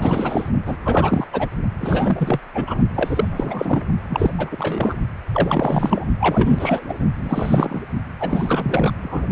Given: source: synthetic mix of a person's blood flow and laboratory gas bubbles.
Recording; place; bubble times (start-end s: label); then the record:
Doppler ultrasound of blood flow; precordium
0.00-0.50 s: bubbles
0.66-0.76 s: bubbles
0.85-1.26 s: bubbles
1.32-1.48 s: bubbles
1.80-2.40 s: bubbles
2.54-2.63 s: bubbles
2.67-2.75 s: bubbles
2.96-3.82 s: bubbles
4.09-4.30 s: bubbles
4.38-4.98 s: bubbles
5.33-6.05 s: bubbles
6.20-6.85 s: bubbles
6.88-6.94 s: bubbles
7.18-7.82 s: bubbles
8.20-8.91 s: bubbles
9.02-9.26 s: bubbles
From the record:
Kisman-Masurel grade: 343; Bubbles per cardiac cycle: rolling drumbeat, 9 or more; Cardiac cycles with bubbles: 100%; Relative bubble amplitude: loud (0.450 to 0.775); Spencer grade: 3 (all of the cardiac periods contain showers or single bubble signals, but not dominating or overriding the cardiac motion signals); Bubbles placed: only in the low amplitude regions of the cardiac cycle